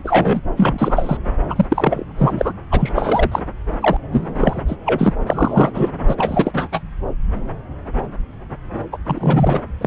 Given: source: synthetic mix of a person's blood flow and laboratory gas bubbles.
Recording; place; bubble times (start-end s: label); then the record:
Doppler ultrasound of blood flow; subclavian vein
0.00-0.41 s: bubbles
0.56-1.18 s: bubbles
1.48-1.65 s: bubbles
1.69-2.04 s: bubbles
2.17-2.52 s: bubbles
2.71-2.92 s: bubbles
2.95-3.42 s: bubbles
3.81-3.97 s: bubbles
4.12-4.64 s: bubbles
4.68-4.76 s: bubbles
4.86-5.13 s: bubbles
5.26-5.72 s: bubbles
5.74-5.92 s: bubbles
6.08-6.69 s: bubbles
6.72-6.81 s: bubbles
8.92-8.97 s: bubbles
9.06-9.62 s: bubbles
9.81-9.87 s: bubbles
From the record:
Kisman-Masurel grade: 333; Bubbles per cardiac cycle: rolling drumbeat, 9 or more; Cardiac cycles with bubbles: 50 to 99%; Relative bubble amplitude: loud (0.450 to 0.775); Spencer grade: 3 (all of the cardiac periods contain showers or single bubble signals, but not dominating or overriding the cardiac motion signals); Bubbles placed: anywhere in the cardiac cycle